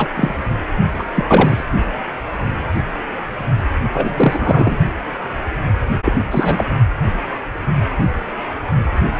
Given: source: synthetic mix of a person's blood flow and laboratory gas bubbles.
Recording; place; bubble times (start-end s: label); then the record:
Doppler ultrasound of blood flow; precordium
0.00-0.09 s: bubbles
0.16-0.34 s: bubbles
0.98-1.02 s: bubbles
1.15-1.65 s: bubbles
3.92-4.78 s: bubbles
6.04-6.12 s: bubbles
6.31-6.65 s: bubbles
From the record:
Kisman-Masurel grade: 223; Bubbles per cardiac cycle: several, 3 to 8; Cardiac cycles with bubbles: 10 to 50%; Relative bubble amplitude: loud (0.450 to 0.775); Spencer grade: 2 (many but less than half of the cardiac periods contain bubble signals, singularly or in groups); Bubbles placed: only in the low amplitude regions of the cardiac cycle